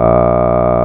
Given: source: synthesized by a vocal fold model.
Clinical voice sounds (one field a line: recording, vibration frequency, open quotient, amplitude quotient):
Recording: sustained vowel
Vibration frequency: 60 Hz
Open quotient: 0.3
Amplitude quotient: 1.3